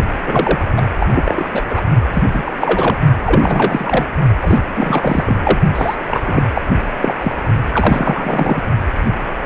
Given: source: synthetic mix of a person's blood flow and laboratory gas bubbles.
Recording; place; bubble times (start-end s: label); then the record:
Doppler ultrasound of blood flow; precordium
0.27-0.59 s: bubbles
0.76-0.83 s: bubbles
1.00-1.06 s: bubbles
1.13-1.47 s: bubbles
1.53-1.62 s: bubbles
1.69-1.81 s: bubbles
2.13-2.23 s: bubbles
2.33-2.97 s: bubbles
3.25-4.05 s: bubbles
4.40-5.36 s: bubbles
5.44-5.58 s: bubbles
5.75-5.96 s: bubbles
6.07-6.43 s: bubbles
6.54-6.62 s: bubbles
6.99-7.14 s: bubbles
7.18-7.33 s: bubbles
7.73-8.62 s: bubbles
From the record:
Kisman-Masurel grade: 333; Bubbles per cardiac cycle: rolling drumbeat, 9 or more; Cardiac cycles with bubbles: 50 to 99%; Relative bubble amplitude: loud (0.450 to 0.775); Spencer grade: 3 (all of the cardiac periods contain showers or single bubble signals, but not dominating or overriding the cardiac motion signals); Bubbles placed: only in the low amplitude regions of the cardiac cycle